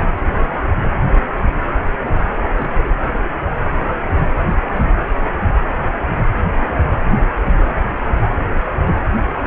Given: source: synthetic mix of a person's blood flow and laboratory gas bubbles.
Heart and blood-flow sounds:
Doppler ultrasound of blood flow; precordium
0.35-0.41 s: bubbles
0.46-0.64 s: bubbles
2.55-2.71 s: bubbles
2.77-2.90 s: bubbles
5.61-5.80 s: bubbles
9.25-9.33 s: bubbles
9.45-9.47 s: bubbles
From the record:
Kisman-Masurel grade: 121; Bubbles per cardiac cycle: 1 to 2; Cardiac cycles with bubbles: 10 to 50%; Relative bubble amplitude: barely perceptible (0.100 to 0.250); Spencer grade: 2 (many but less than half of the cardiac periods contain bubble signals, singularly or in groups); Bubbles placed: anywhere in the cardiac cycle

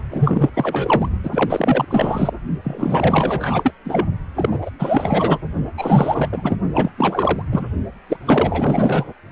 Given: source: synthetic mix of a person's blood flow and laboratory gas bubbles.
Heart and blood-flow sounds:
Doppler ultrasound of blood flow; precordium
0.10-0.50 s: bubbles
0.53-1.08 s: bubbles
1.23-1.85 s: bubbles
1.90-2.31 s: bubbles
2.64-3.73 s: bubbles
3.84-4.07 s: bubbles
4.35-4.58 s: bubbles
4.61-4.70 s: bubbles
4.79-5.39 s: bubbles
5.77-6.28 s: bubbles
6.32-6.57 s: bubbles
6.73-6.90 s: bubbles
6.98-7.42 s: bubbles
7.51-7.67 s: bubbles
8.09-8.17 s: bubbles
8.26-9.05 s: bubbles
From the record:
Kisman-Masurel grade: 444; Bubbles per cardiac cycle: continuous sound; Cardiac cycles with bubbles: 100%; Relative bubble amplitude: maximal (0.775 to 0.999); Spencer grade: 4 (maximum detectable bubble signal sounding continuously throughout systole and diastole of every cardiac period, and overriding the amplitude of the normal cardiac signals); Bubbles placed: only in the low amplitude regions of the cardiac cycle

